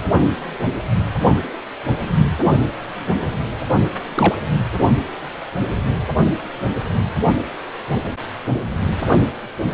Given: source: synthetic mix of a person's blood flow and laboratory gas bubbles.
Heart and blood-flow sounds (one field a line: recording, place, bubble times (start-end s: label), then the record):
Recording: Doppler ultrasound of blood flow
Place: precordium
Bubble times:
4.15-4.35 s: bubbles
From the record:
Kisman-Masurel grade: 122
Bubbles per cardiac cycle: 1 to 2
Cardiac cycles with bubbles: 10 to 50%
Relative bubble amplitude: moderate (0.250 to 0.450)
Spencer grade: 2 (many but less than half of the cardiac periods contain bubble signals, singularly or in groups)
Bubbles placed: only in the low amplitude regions of the cardiac cycle